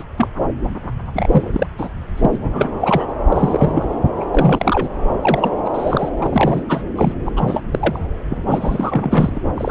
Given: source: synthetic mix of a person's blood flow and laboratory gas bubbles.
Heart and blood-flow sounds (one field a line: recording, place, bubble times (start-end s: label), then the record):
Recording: Doppler ultrasound of blood flow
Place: subclavian vein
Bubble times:
0.00-0.04 s: bubbles
0.17-0.27 s: bubbles
1.13-1.67 s: bubbles
1.77-1.88 s: bubbles
2.17-2.50 s: bubbles
2.53-3.08 s: bubbles
3.29-3.85 s: bubbles
4.20-4.25 s: bubbles
4.31-4.89 s: bubbles
5.21-5.50 s: bubbles
5.64-5.70 s: bubbles
5.73-6.09 s: bubbles
6.22-6.62 s: bubbles
6.68-6.82 s: bubbles
6.96-7.12 s: bubbles
7.25-7.32 s: bubbles
7.36-7.63 s: bubbles
7.73-8.00 s: bubbles
8.30-9.40 s: bubbles
9.57-9.71 s: bubbles
From the record:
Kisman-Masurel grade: 343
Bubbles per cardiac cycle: rolling drumbeat, 9 or more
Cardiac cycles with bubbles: 100%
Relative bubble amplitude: loud (0.450 to 0.775)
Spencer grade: 3 (all of the cardiac periods contain showers or single bubble signals, but not dominating or overriding the cardiac motion signals)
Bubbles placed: anywhere in the cardiac cycle